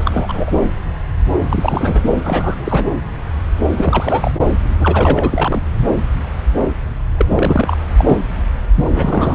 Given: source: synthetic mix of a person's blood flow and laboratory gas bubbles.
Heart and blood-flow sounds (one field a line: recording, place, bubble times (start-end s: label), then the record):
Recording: Doppler ultrasound of blood flow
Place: subclavian vein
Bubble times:
0.00-0.51 s: bubbles
1.43-2.04 s: bubbles
2.23-2.85 s: bubbles
3.77-4.32 s: bubbles
4.79-5.60 s: bubbles
7.18-7.26 s: bubbles
7.29-7.77 s: bubbles
7.97-8.17 s: bubbles
8.75-8.89 s: bubbles
8.92-9.35 s: bubbles
From the record:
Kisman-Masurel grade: 333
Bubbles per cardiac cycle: rolling drumbeat, 9 or more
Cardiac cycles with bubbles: 50 to 99%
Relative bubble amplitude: loud (0.450 to 0.775)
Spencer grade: 3 (all of the cardiac periods contain showers or single bubble signals, but not dominating or overriding the cardiac motion signals)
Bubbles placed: anywhere in the cardiac cycle